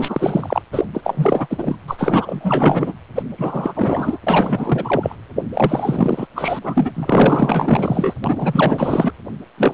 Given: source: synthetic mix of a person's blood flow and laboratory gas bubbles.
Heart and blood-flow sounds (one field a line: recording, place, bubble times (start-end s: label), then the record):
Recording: Doppler ultrasound of blood flow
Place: precordium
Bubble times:
0.00-0.61 s: bubbles
0.72-0.84 s: bubbles
0.94-1.47 s: bubbles
1.50-1.76 s: bubbles
1.88-2.93 s: bubbles
3.15-3.23 s: bubbles
3.38-4.18 s: bubbles
4.26-5.15 s: bubbles
5.53-6.27 s: bubbles
6.35-6.59 s: bubbles
6.63-6.91 s: bubbles
6.94-8.13 s: bubbles
8.24-9.12 s: bubbles
9.57-9.74 s: bubbles
From the record:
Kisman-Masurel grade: 444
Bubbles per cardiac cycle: continuous sound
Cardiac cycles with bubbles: 100%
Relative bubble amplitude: maximal (0.775 to 0.999)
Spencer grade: 4 (maximum detectable bubble signal sounding continuously throughout systole and diastole of every cardiac period, and overriding the amplitude of the normal cardiac signals)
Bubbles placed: anywhere in the cardiac cycle